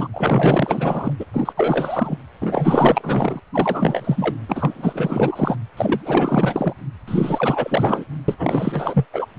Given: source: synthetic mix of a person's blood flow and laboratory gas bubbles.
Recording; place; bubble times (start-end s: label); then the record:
Doppler ultrasound of blood flow; precordium
0.00-0.08 s: bubbles
0.13-1.14 s: bubbles
1.19-1.25 s: bubbles
1.33-1.52 s: bubbles
1.56-2.17 s: bubbles
2.41-3.40 s: bubbles
3.53-4.34 s: bubbles
4.48-5.56 s: bubbles
5.77-6.74 s: bubbles
7.08-8.04 s: bubbles
8.28-9.05 s: bubbles
9.12-9.26 s: bubbles
From the record:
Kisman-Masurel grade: 444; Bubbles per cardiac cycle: continuous sound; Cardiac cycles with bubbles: 100%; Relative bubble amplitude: maximal (0.775 to 0.999); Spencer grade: 4 (maximum detectable bubble signal sounding continuously throughout systole and diastole of every cardiac period, and overriding the amplitude of the normal cardiac signals); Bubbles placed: anywhere in the cardiac cycle